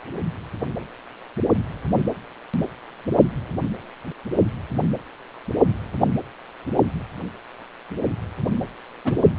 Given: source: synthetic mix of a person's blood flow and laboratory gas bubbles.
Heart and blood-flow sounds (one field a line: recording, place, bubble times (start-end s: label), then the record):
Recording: Doppler ultrasound of blood flow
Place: precordium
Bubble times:
9.04-9.27 s: bubbles
From the record:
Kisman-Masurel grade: 112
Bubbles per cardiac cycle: 1 to 2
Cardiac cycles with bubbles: 1 to 10%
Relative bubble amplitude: moderate (0.250 to 0.450)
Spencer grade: 1 (occasional bubble signal discernible with the cardiac motion signal, with majority of cardiac periods free of bubbles)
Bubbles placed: anywhere in the cardiac cycle